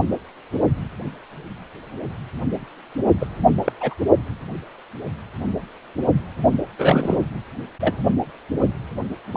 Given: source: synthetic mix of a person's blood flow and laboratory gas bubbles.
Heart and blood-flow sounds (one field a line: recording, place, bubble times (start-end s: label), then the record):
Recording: Doppler ultrasound of blood flow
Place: precordium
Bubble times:
3.20-3.27 s: bubbles
3.65-3.72 s: bubbles
3.81-3.94 s: bubbles
6.79-7.17 s: bubbles
7.80-7.98 s: bubbles
9.34-9.37 s: bubbles
From the record:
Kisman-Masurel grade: 222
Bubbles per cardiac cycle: several, 3 to 8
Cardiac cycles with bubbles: 10 to 50%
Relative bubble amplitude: moderate (0.250 to 0.450)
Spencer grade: 2 (many but less than half of the cardiac periods contain bubble signals, singularly or in groups)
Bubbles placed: only in the low amplitude regions of the cardiac cycle